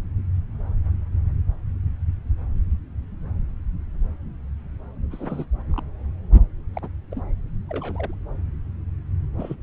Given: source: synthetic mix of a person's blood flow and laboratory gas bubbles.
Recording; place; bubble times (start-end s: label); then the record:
Doppler ultrasound of blood flow; subclavian vein
5.11-5.45 s: bubbles
5.71-5.83 s: bubbles
6.74-6.79 s: bubbles
6.82-6.88 s: bubbles
7.12-7.22 s: bubbles
7.69-8.14 s: bubbles
9.38-9.55 s: bubbles
From the record:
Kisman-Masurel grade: 121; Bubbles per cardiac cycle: 1 to 2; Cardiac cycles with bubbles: 10 to 50%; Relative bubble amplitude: barely perceptible (0.100 to 0.250); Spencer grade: 2 (many but less than half of the cardiac periods contain bubble signals, singularly or in groups); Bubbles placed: anywhere in the cardiac cycle